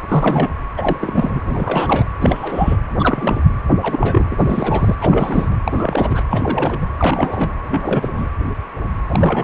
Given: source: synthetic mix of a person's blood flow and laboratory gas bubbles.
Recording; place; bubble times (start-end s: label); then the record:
Doppler ultrasound of blood flow; precordium
0.08-0.51 s: bubbles
0.77-1.41 s: bubbles
1.45-2.06 s: bubbles
2.21-2.77 s: bubbles
2.98-3.44 s: bubbles
3.82-4.96 s: bubbles
5.00-5.59 s: bubbles
5.65-6.24 s: bubbles
6.30-6.88 s: bubbles
6.99-7.53 s: bubbles
7.69-8.08 s: bubbles
8.12-8.29 s: bubbles
9.09-9.44 s: bubbles
From the record:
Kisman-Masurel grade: 332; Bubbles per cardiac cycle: rolling drumbeat, 9 or more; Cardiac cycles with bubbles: 50 to 99%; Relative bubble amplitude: moderate (0.250 to 0.450); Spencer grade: 3 (all of the cardiac periods contain showers or single bubble signals, but not dominating or overriding the cardiac motion signals); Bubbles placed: anywhere in the cardiac cycle